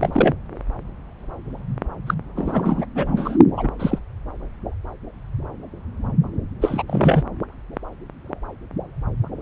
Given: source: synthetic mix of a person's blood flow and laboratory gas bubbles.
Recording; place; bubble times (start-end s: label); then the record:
Doppler ultrasound of blood flow; subclavian vein
0.00-0.35 s: bubbles
2.07-2.14 s: bubbles
2.35-2.86 s: bubbles
2.95-3.37 s: bubbles
3.56-3.68 s: bubbles
3.79-3.99 s: bubbles
6.61-6.83 s: bubbles
6.87-7.24 s: bubbles
From the record:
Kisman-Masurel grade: 222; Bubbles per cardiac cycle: several, 3 to 8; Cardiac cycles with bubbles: 10 to 50%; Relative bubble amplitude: moderate (0.250 to 0.450); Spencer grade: 2 (many but less than half of the cardiac periods contain bubble signals, singularly or in groups); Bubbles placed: anywhere in the cardiac cycle